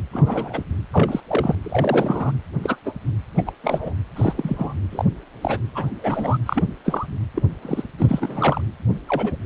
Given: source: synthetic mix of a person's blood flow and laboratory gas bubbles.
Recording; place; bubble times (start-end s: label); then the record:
Doppler ultrasound of blood flow; precordium
0.13-0.63 s: bubbles
0.92-1.21 s: bubbles
1.28-1.55 s: bubbles
1.62-2.32 s: bubbles
2.63-2.75 s: bubbles
2.85-2.93 s: bubbles
3.38-3.43 s: bubbles
3.46-3.52 s: bubbles
3.64-3.94 s: bubbles
4.16-4.33 s: bubbles
4.37-4.74 s: bubbles
4.92-5.05 s: bubbles
5.41-5.58 s: bubbles
5.75-5.91 s: bubbles
6.02-6.37 s: bubbles
6.46-6.64 s: bubbles
6.84-7.07 s: bubbles
7.35-7.42 s: bubbles
7.62-7.84 s: bubbles
7.98-8.61 s: bubbles
9.07-9.36 s: bubbles
From the record:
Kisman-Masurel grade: 242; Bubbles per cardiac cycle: several, 3 to 8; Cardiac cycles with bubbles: 100%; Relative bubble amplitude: moderate (0.250 to 0.450); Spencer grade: 3 (all of the cardiac periods contain showers or single bubble signals, but not dominating or overriding the cardiac motion signals); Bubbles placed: anywhere in the cardiac cycle